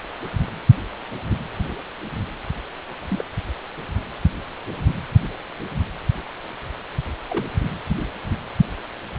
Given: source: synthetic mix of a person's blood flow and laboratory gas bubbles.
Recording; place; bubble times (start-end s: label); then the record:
Doppler ultrasound of blood flow; precordium
3.11-3.25 s: bubbles
7.29-7.46 s: bubbles
From the record:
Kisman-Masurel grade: 121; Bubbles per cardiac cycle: 1 to 2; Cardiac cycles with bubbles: 10 to 50%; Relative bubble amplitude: barely perceptible (0.100 to 0.250); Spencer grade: 2 (many but less than half of the cardiac periods contain bubble signals, singularly or in groups); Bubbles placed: anywhere in the cardiac cycle